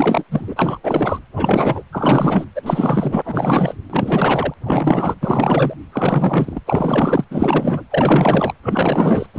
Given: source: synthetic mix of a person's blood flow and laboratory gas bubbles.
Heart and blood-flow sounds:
Doppler ultrasound of blood flow; precordium
0.00-0.23 s: bubbles
0.31-0.78 s: bubbles
0.83-1.19 s: bubbles
1.33-1.82 s: bubbles
1.92-2.45 s: bubbles
2.54-3.75 s: bubbles
3.90-4.54 s: bubbles
4.65-5.15 s: bubbles
5.21-5.74 s: bubbles
5.92-6.60 s: bubbles
6.66-7.25 s: bubbles
7.31-7.84 s: bubbles
7.90-8.53 s: bubbles
8.62-9.27 s: bubbles
9.34-9.39 s: bubbles
From the record:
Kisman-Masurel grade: 444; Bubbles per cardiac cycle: continuous sound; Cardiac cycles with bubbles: 100%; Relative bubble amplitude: maximal (0.775 to 0.999); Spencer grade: 4 (maximum detectable bubble signal sounding continuously throughout systole and diastole of every cardiac period, and overriding the amplitude of the normal cardiac signals); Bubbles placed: anywhere in the cardiac cycle

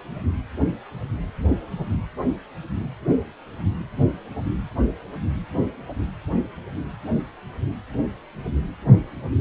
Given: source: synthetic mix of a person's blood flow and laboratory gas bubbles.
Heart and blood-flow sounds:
Doppler ultrasound of blood flow; precordium
no bubbles
From the record:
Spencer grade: 0 (complete lack of bubble signals)

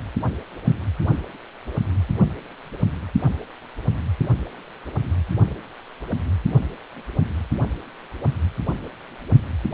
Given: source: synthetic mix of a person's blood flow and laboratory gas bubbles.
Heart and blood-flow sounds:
Doppler ultrasound of blood flow; precordium
no bubbles
From the record:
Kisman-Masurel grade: 000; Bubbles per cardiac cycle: 0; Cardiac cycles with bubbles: 0%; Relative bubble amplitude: no bubbles discernible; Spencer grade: 0 (complete lack of bubble signals)

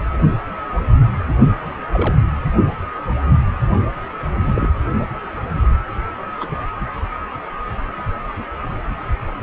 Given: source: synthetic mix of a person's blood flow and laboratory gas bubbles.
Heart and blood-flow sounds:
Doppler ultrasound of blood flow; precordium
1.92-2.16 s: bubbles
4.46-4.67 s: bubbles
6.40-6.48 s: bubbles
From the record:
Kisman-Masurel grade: 122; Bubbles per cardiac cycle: 1 to 2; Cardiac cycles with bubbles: 10 to 50%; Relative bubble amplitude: moderate (0.250 to 0.450); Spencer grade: 2 (many but less than half of the cardiac periods contain bubble signals, singularly or in groups); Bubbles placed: anywhere in the cardiac cycle

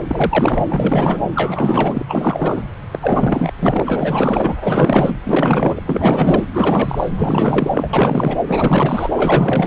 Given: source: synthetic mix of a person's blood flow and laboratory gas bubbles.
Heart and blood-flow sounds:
Doppler ultrasound of blood flow; subclavian vein
0.07-0.65 s: bubbles
0.68-1.21 s: bubbles
1.35-2.04 s: bubbles
2.08-2.63 s: bubbles
2.91-3.52 s: bubbles
3.59-4.55 s: bubbles
4.61-5.17 s: bubbles
5.25-5.81 s: bubbles
5.85-6.45 s: bubbles
6.51-7.09 s: bubbles
7.17-7.88 s: bubbles
7.93-8.39 s: bubbles
8.47-9.09 s: bubbles
9.14-9.66 s: bubbles
From the record:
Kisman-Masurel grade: 444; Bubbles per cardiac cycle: continuous sound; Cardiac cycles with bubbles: 100%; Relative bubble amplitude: maximal (0.775 to 0.999); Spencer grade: 4 (maximum detectable bubble signal sounding continuously throughout systole and diastole of every cardiac period, and overriding the amplitude of the normal cardiac signals); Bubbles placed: anywhere in the cardiac cycle

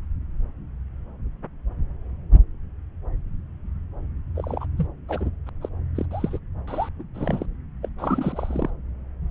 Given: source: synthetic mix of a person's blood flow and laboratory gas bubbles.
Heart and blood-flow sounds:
Doppler ultrasound of blood flow; subclavian vein
4.35-4.66 s: bubbles
4.77-4.88 s: bubbles
5.08-5.29 s: bubbles
5.46-5.50 s: bubbles
5.61-5.69 s: bubbles
5.96-6.05 s: bubbles
6.11-6.38 s: bubbles
6.67-6.89 s: bubbles
6.99-7.03 s: bubbles
7.14-7.46 s: bubbles
7.82-7.89 s: bubbles
7.98-8.71 s: bubbles
From the record:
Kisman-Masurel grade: 221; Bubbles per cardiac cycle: several, 3 to 8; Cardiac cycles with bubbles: 10 to 50%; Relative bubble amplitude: barely perceptible (0.100 to 0.250); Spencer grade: 2 (many but less than half of the cardiac periods contain bubble signals, singularly or in groups); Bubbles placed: anywhere in the cardiac cycle

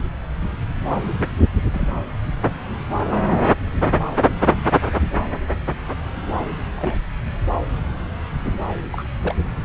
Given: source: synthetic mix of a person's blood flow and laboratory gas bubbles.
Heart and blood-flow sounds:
Doppler ultrasound of blood flow; subclavian vein
0.89-1.07 s: bubbles
1.19-1.29 s: bubbles
1.73-1.89 s: bubbles
3.31-3.39 s: bubbles
6.76-6.96 s: bubbles
8.91-9.04 s: bubbles
9.23-9.34 s: bubbles
From the record:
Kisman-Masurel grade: 122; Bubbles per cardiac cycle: 1 to 2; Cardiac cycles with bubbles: 10 to 50%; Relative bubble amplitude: moderate (0.250 to 0.450); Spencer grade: 2 (many but less than half of the cardiac periods contain bubble signals, singularly or in groups); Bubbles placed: anywhere in the cardiac cycle

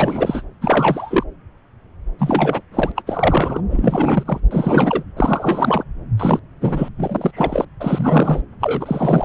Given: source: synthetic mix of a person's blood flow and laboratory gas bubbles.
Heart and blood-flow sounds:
Doppler ultrasound of blood flow; subclavian vein
0.00-0.42 s: bubbles
0.61-1.24 s: bubbles
2.19-2.61 s: bubbles
2.71-2.92 s: bubbles
2.95-3.02 s: bubbles
3.06-3.60 s: bubbles
3.69-4.40 s: bubbles
4.51-5.04 s: bubbles
5.17-5.83 s: bubbles
6.18-6.40 s: bubbles
6.60-6.89 s: bubbles
6.98-7.65 s: bubbles
7.80-8.41 s: bubbles
8.60-9.25 s: bubbles
From the record:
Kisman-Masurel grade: 333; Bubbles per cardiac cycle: rolling drumbeat, 9 or more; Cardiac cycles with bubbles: 50 to 99%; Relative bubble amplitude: loud (0.450 to 0.775); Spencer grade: 3 (all of the cardiac periods contain showers or single bubble signals, but not dominating or overriding the cardiac motion signals); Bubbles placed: anywhere in the cardiac cycle

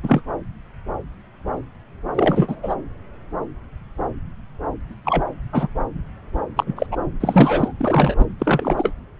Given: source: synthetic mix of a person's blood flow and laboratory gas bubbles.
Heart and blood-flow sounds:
Doppler ultrasound of blood flow; subclavian vein
0.02-0.21 s: bubbles
2.14-2.55 s: bubbles
2.62-2.75 s: bubbles
5.04-5.24 s: bubbles
5.52-5.68 s: bubbles
6.56-6.64 s: bubbles
6.67-6.87 s: bubbles
6.91-6.96 s: bubbles
7.20-7.73 s: bubbles
7.79-8.15 s: bubbles
8.18-8.25 s: bubbles
8.39-8.90 s: bubbles
From the record:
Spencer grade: 3 (all of the cardiac periods contain showers or single bubble signals, but not dominating or overriding the cardiac motion signals); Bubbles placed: anywhere in the cardiac cycle

